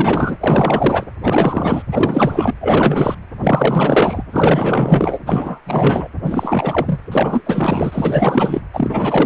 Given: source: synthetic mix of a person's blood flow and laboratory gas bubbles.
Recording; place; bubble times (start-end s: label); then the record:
Doppler ultrasound of blood flow; precordium
0.00-0.36 s: bubbles
0.41-1.05 s: bubbles
1.23-1.82 s: bubbles
1.92-2.54 s: bubbles
2.60-3.15 s: bubbles
3.40-4.23 s: bubbles
4.32-5.19 s: bubbles
5.26-5.60 s: bubbles
5.66-6.08 s: bubbles
6.23-7.01 s: bubbles
7.12-7.43 s: bubbles
7.46-8.60 s: bubbles
8.73-9.26 s: bubbles
From the record:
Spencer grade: 4 (maximum detectable bubble signal sounding continuously throughout systole and diastole of every cardiac period, and overriding the amplitude of the normal cardiac signals); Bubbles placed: anywhere in the cardiac cycle